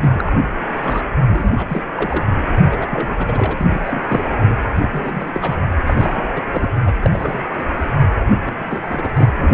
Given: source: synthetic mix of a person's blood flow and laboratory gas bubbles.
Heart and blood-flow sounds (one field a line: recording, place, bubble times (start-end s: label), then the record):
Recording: Doppler ultrasound of blood flow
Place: precordium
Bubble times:
0.00-0.24 s: bubbles
0.27-0.33 s: bubbles
0.81-1.01 s: bubbles
1.27-1.84 s: bubbles
1.96-2.25 s: bubbles
2.65-2.88 s: bubbles
2.90-3.65 s: bubbles
3.69-3.79 s: bubbles
3.85-4.03 s: bubbles
4.08-4.25 s: bubbles
4.49-4.56 s: bubbles
4.74-5.68 s: bubbles
5.80-6.28 s: bubbles
6.36-6.41 s: bubbles
6.49-6.71 s: bubbles
6.85-6.94 s: bubbles
6.98-7.45 s: bubbles
7.57-7.64 s: bubbles
8.26-9.11 s: bubbles
9.14-9.29 s: bubbles
9.36-9.51 s: bubbles
From the record:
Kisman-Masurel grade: 332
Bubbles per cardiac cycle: rolling drumbeat, 9 or more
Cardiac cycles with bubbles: 50 to 99%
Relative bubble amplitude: moderate (0.250 to 0.450)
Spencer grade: 3 (all of the cardiac periods contain showers or single bubble signals, but not dominating or overriding the cardiac motion signals)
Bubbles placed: anywhere in the cardiac cycle